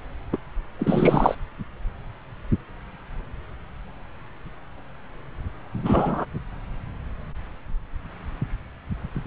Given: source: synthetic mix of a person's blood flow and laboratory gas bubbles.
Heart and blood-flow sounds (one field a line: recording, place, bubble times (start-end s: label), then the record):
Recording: Doppler ultrasound of blood flow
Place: subclavian vein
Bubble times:
0.32-0.37 s: bubbles
0.79-1.35 s: bubbles
5.84-6.25 s: bubbles
From the record:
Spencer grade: 2 (many but less than half of the cardiac periods contain bubble signals, singularly or in groups)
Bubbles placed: anywhere in the cardiac cycle